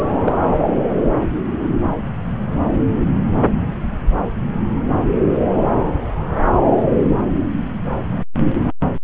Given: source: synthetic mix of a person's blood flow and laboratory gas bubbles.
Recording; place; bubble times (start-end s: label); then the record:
Doppler ultrasound of blood flow; subclavian vein
0.24-0.33 s: bubbles
From the record:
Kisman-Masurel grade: 112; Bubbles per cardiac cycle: 1 to 2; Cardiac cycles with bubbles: 1 to 10%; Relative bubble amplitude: moderate (0.250 to 0.450); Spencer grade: 1 (occasional bubble signal discernible with the cardiac motion signal, with majority of cardiac periods free of bubbles); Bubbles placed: anywhere in the cardiac cycle